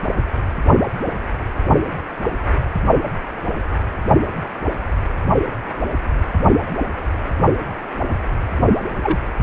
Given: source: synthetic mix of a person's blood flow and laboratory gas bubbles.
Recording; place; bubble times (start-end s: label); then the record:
Doppler ultrasound of blood flow; precordium
9.03-9.18 s: bubbles
From the record:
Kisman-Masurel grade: 212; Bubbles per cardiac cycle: several, 3 to 8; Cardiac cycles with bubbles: 1 to 10%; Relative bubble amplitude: moderate (0.250 to 0.450); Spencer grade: 1 (occasional bubble signal discernible with the cardiac motion signal, with majority of cardiac periods free of bubbles); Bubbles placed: only in the low amplitude regions of the cardiac cycle